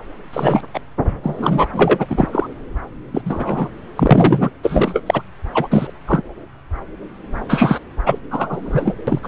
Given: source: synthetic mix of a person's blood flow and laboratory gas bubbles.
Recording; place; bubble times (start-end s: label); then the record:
Doppler ultrasound of blood flow; subclavian vein
0.33-0.60 s: bubbles
0.74-0.79 s: bubbles
1.23-1.68 s: bubbles
1.72-2.05 s: bubbles
2.09-2.29 s: bubbles
2.32-2.46 s: bubbles
3.13-3.21 s: bubbles
3.25-3.69 s: bubbles
3.96-4.50 s: bubbles
4.63-5.03 s: bubbles
5.06-5.22 s: bubbles
5.54-5.67 s: bubbles
5.71-5.91 s: bubbles
6.08-6.21 s: bubbles
7.48-7.79 s: bubbles
8.05-8.19 s: bubbles
8.30-8.95 s: bubbles
9.07-9.19 s: bubbles
9.22-9.28 s: bubbles
From the record:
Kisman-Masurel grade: 233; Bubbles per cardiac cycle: several, 3 to 8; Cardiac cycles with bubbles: 50 to 99%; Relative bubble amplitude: loud (0.450 to 0.775); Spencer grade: 3 (all of the cardiac periods contain showers or single bubble signals, but not dominating or overriding the cardiac motion signals); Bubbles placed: anywhere in the cardiac cycle